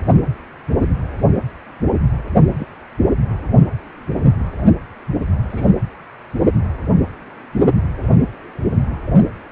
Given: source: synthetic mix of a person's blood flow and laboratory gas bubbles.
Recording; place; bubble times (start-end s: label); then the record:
Doppler ultrasound of blood flow; precordium
2.58-2.66 s: bubbles
5.49-5.70 s: bubbles
From the record:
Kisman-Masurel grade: 122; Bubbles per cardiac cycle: 1 to 2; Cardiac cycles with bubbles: 10 to 50%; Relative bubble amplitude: moderate (0.250 to 0.450); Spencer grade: 2 (many but less than half of the cardiac periods contain bubble signals, singularly or in groups); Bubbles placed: only in the low amplitude regions of the cardiac cycle